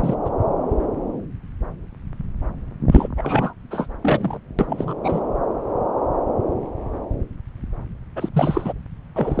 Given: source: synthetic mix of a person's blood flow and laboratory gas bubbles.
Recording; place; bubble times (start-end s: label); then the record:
Doppler ultrasound of blood flow; subclavian vein
0.00-0.15 s: bubbles
0.25-0.30 s: bubbles
2.91-3.08 s: bubbles
3.17-3.54 s: bubbles
3.71-3.86 s: bubbles
4.02-4.39 s: bubbles
4.58-4.94 s: bubbles
5.03-5.21 s: bubbles
8.15-8.29 s: bubbles
8.33-8.73 s: bubbles
9.15-9.40 s: bubbles
From the record:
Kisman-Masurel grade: 333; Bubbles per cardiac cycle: rolling drumbeat, 9 or more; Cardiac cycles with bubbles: 50 to 99%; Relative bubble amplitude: loud (0.450 to 0.775); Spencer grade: 3 (all of the cardiac periods contain showers or single bubble signals, but not dominating or overriding the cardiac motion signals); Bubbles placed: anywhere in the cardiac cycle